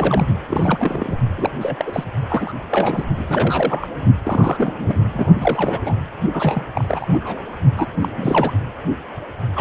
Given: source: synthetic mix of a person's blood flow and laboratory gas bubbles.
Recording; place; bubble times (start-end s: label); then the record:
Doppler ultrasound of blood flow; precordium
0.00-0.28 s: bubbles
0.48-1.17 s: bubbles
1.38-1.52 s: bubbles
1.61-1.75 s: bubbles
1.78-2.04 s: bubbles
2.29-2.53 s: bubbles
2.71-3.05 s: bubbles
3.17-3.88 s: bubbles
4.23-4.97 s: bubbles
5.12-5.27 s: bubbles
5.41-5.96 s: bubbles
6.33-6.65 s: bubbles
6.75-7.08 s: bubbles
7.12-7.40 s: bubbles
7.75-7.86 s: bubbles
8.01-8.08 s: bubbles
8.16-8.53 s: bubbles
9.55-9.61 s: bubbles
From the record:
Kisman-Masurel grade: 342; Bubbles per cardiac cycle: rolling drumbeat, 9 or more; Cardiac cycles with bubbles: 100%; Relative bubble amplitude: moderate (0.250 to 0.450); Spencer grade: 3 (all of the cardiac periods contain showers or single bubble signals, but not dominating or overriding the cardiac motion signals); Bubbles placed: only in the low amplitude regions of the cardiac cycle